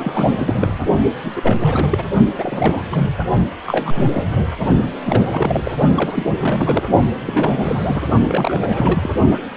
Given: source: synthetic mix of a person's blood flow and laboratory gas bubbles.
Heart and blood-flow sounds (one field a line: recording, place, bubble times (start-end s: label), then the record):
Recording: Doppler ultrasound of blood flow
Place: precordium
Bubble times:
0.00-0.80 s: bubbles
1.25-1.32 s: bubbles
1.35-2.04 s: bubbles
2.38-3.04 s: bubbles
3.66-4.05 s: bubbles
4.12-4.23 s: bubbles
4.33-4.43 s: bubbles
5.05-5.29 s: bubbles
5.32-5.71 s: bubbles
5.95-6.28 s: bubbles
6.40-6.83 s: bubbles
7.26-8.02 s: bubbles
8.28-9.10 s: bubbles
9.30-9.38 s: bubbles
From the record:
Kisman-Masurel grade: 342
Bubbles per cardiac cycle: rolling drumbeat, 9 or more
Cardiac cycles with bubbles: 100%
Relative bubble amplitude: moderate (0.250 to 0.450)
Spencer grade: 3 (all of the cardiac periods contain showers or single bubble signals, but not dominating or overriding the cardiac motion signals)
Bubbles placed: only in the low amplitude regions of the cardiac cycle